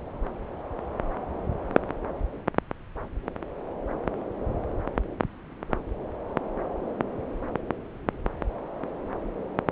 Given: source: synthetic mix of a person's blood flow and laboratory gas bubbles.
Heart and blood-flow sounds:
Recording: Doppler ultrasound of blood flow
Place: subclavian vein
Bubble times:
no bubbles
From the record:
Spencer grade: 0 (complete lack of bubble signals)

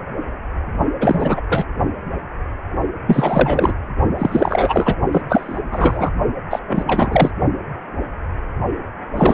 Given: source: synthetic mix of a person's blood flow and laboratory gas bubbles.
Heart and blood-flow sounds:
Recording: Doppler ultrasound of blood flow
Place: precordium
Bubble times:
1.00-1.40 s: bubbles
1.49-1.66 s: bubbles
3.07-3.72 s: bubbles
4.18-4.94 s: bubbles
5.12-5.21 s: bubbles
5.29-5.61 s: bubbles
5.71-6.10 s: bubbles
6.50-6.59 s: bubbles
6.66-7.31 s: bubbles
9.14-9.34 s: bubbles
From the record:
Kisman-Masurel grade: 333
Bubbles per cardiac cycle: rolling drumbeat, 9 or more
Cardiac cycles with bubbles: 50 to 99%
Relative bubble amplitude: loud (0.450 to 0.775)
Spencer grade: 3 (all of the cardiac periods contain showers or single bubble signals, but not dominating or overriding the cardiac motion signals)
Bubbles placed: only in the low amplitude regions of the cardiac cycle

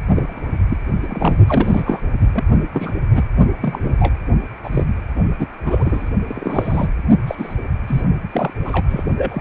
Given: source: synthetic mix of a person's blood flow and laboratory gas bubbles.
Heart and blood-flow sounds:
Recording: Doppler ultrasound of blood flow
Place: precordium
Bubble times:
0.15-0.50 s: bubbles
0.68-0.77 s: bubbles
1.02-1.36 s: bubbles
1.48-2.01 s: bubbles
2.34-2.44 s: bubbles
2.73-2.92 s: bubbles
3.15-3.23 s: bubbles
3.62-3.95 s: bubbles
3.99-4.16 s: bubbles
4.63-4.85 s: bubbles
5.39-5.46 s: bubbles
5.65-6.10 s: bubbles
6.27-6.92 s: bubbles
7.27-7.35 s: bubbles
7.38-7.54 s: bubbles
7.87-8.02 s: bubbles
8.31-8.54 s: bubbles
8.63-8.84 s: bubbles
8.89-9.04 s: bubbles
9.17-9.41 s: bubbles
From the record:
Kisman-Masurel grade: 242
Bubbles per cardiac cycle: several, 3 to 8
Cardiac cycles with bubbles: 100%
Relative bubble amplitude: moderate (0.250 to 0.450)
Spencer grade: 3 (all of the cardiac periods contain showers or single bubble signals, but not dominating or overriding the cardiac motion signals)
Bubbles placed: only in the low amplitude regions of the cardiac cycle

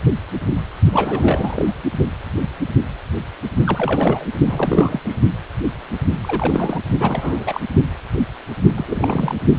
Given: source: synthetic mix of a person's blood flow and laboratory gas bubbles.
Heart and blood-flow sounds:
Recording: Doppler ultrasound of blood flow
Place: precordium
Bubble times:
0.92-1.73 s: bubbles
3.64-4.25 s: bubbles
4.46-5.00 s: bubbles
5.04-5.16 s: bubbles
6.23-6.80 s: bubbles
7.00-7.60 s: bubbles
8.76-9.36 s: bubbles
From the record:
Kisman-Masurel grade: 332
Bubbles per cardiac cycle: rolling drumbeat, 9 or more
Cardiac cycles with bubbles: 50 to 99%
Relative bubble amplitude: moderate (0.250 to 0.450)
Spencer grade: 3 (all of the cardiac periods contain showers or single bubble signals, but not dominating or overriding the cardiac motion signals)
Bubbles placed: only in the low amplitude regions of the cardiac cycle

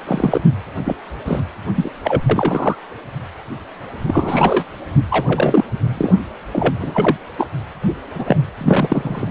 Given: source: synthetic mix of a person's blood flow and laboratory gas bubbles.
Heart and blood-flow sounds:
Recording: Doppler ultrasound of blood flow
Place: precordium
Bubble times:
0.06-0.41 s: bubbles
0.84-0.96 s: bubbles
1.25-1.42 s: bubbles
1.74-1.91 s: bubbles
2.04-2.21 s: bubbles
2.29-2.75 s: bubbles
4.07-4.64 s: bubbles
5.10-5.64 s: bubbles
5.97-6.14 s: bubbles
6.52-6.73 s: bubbles
6.79-7.17 s: bubbles
7.37-7.47 s: bubbles
8.15-8.37 s: bubbles
8.61-9.31 s: bubbles
From the record:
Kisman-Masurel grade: 233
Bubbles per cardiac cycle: several, 3 to 8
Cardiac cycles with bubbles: 50 to 99%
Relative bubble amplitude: loud (0.450 to 0.775)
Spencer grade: 3 (all of the cardiac periods contain showers or single bubble signals, but not dominating or overriding the cardiac motion signals)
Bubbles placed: anywhere in the cardiac cycle

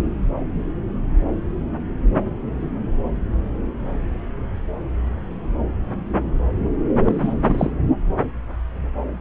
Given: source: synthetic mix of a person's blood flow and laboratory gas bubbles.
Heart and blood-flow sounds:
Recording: Doppler ultrasound of blood flow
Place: subclavian vein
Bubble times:
7.04-7.34 s: bubbles
7.46-7.72 s: bubbles
From the record:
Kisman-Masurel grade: 222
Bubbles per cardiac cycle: several, 3 to 8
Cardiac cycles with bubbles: 10 to 50%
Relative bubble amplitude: moderate (0.250 to 0.450)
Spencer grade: 2 (many but less than half of the cardiac periods contain bubble signals, singularly or in groups)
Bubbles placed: anywhere in the cardiac cycle

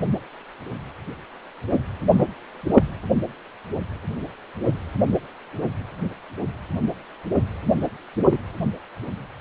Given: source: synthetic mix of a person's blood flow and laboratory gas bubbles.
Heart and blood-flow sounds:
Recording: Doppler ultrasound of blood flow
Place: precordium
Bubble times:
2.11-2.27 s: bubbles
2.75-2.83 s: bubbles
8.30-8.38 s: bubbles
From the record:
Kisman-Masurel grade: 122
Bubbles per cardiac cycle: 1 to 2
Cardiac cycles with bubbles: 10 to 50%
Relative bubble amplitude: moderate (0.250 to 0.450)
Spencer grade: 2 (many but less than half of the cardiac periods contain bubble signals, singularly or in groups)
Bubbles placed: anywhere in the cardiac cycle

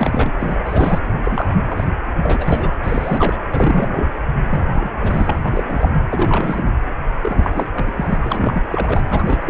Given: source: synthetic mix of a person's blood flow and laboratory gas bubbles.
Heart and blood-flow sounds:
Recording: Doppler ultrasound of blood flow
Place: precordium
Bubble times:
0.00-0.32 s: bubbles
0.39-0.62 s: bubbles
0.66-0.99 s: bubbles
1.23-1.85 s: bubbles
2.23-2.74 s: bubbles
2.84-3.40 s: bubbles
3.51-4.13 s: bubbles
4.50-5.39 s: bubbles
5.45-5.91 s: bubbles
6.09-6.71 s: bubbles
7.22-7.67 s: bubbles
7.73-7.92 s: bubbles
7.96-8.18 s: bubbles
8.21-8.61 s: bubbles
8.68-9.04 s: bubbles
9.07-9.50 s: bubbles
From the record:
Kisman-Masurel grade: 342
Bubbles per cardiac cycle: rolling drumbeat, 9 or more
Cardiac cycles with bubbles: 100%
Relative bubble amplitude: moderate (0.250 to 0.450)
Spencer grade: 3 (all of the cardiac periods contain showers or single bubble signals, but not dominating or overriding the cardiac motion signals)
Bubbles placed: anywhere in the cardiac cycle

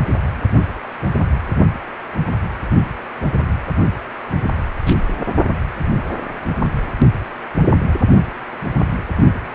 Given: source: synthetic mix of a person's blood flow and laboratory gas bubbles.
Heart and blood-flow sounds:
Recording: Doppler ultrasound of blood flow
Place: precordium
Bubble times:
4.86-4.94 s: bubbles
From the record:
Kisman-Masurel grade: 112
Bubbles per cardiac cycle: 1 to 2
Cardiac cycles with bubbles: 1 to 10%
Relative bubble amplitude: moderate (0.250 to 0.450)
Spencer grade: 1 (occasional bubble signal discernible with the cardiac motion signal, with majority of cardiac periods free of bubbles)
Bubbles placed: only in the low amplitude regions of the cardiac cycle

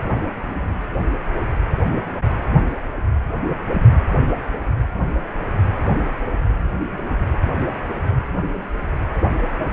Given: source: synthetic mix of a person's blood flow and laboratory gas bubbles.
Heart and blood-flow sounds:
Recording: Doppler ultrasound of blood flow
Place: precordium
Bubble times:
no bubbles
From the record:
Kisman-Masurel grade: 000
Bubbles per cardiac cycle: 0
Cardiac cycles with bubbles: 0%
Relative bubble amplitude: no bubbles discernible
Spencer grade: 0 (complete lack of bubble signals)

